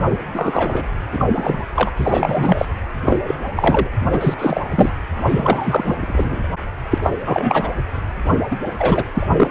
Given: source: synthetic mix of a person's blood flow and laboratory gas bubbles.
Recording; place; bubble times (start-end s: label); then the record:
Doppler ultrasound of blood flow; precordium
0.10-0.18 s: bubbles
0.34-0.86 s: bubbles
1.12-1.26 s: bubbles
1.35-1.65 s: bubbles
1.75-1.92 s: bubbles
1.97-2.65 s: bubbles
3.04-3.19 s: bubbles
3.27-3.35 s: bubbles
3.55-3.89 s: bubbles
4.12-4.34 s: bubbles
4.38-4.63 s: bubbles
4.71-4.89 s: bubbles
5.24-6.41 s: bubbles
6.91-6.99 s: bubbles
7.02-7.10 s: bubbles
7.25-7.72 s: bubbles
8.51-8.57 s: bubbles
8.79-9.04 s: bubbles
9.14-9.27 s: bubbles
9.40-9.50 s: bubbles
From the record:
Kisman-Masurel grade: 243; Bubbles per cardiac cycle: several, 3 to 8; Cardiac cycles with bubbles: 100%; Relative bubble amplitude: loud (0.450 to 0.775); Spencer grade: 3 (all of the cardiac periods contain showers or single bubble signals, but not dominating or overriding the cardiac motion signals); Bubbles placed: anywhere in the cardiac cycle